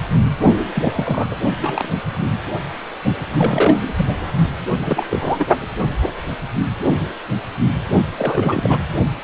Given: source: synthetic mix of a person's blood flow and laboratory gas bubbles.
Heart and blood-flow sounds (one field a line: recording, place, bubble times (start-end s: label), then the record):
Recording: Doppler ultrasound of blood flow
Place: precordium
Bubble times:
0.75-1.27 s: bubbles
1.31-1.36 s: bubbles
1.60-1.88 s: bubbles
3.36-3.78 s: bubbles
3.97-4.09 s: bubbles
4.77-5.07 s: bubbles
5.11-5.45 s: bubbles
8.18-8.80 s: bubbles
From the record:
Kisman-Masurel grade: 232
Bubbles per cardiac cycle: several, 3 to 8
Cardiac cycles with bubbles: 50 to 99%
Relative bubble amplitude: moderate (0.250 to 0.450)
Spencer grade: 3 (all of the cardiac periods contain showers or single bubble signals, but not dominating or overriding the cardiac motion signals)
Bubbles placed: only in the low amplitude regions of the cardiac cycle